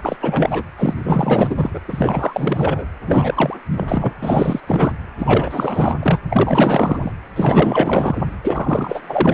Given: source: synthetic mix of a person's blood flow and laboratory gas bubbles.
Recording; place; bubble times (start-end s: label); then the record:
Doppler ultrasound of blood flow; precordium
0.02-0.16 s: bubbles
0.20-0.63 s: bubbles
0.77-0.94 s: bubbles
1.04-1.70 s: bubbles
1.74-1.80 s: bubbles
1.88-2.86 s: bubbles
3.05-3.57 s: bubbles
3.70-4.13 s: bubbles
4.22-4.60 s: bubbles
4.67-4.92 s: bubbles
5.18-5.96 s: bubbles
6.02-6.21 s: bubbles
6.29-7.12 s: bubbles
7.35-8.18 s: bubbles
8.42-9.03 s: bubbles
9.07-9.34 s: bubbles
From the record:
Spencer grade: 4 (maximum detectable bubble signal sounding continuously throughout systole and diastole of every cardiac period, and overriding the amplitude of the normal cardiac signals); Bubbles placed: anywhere in the cardiac cycle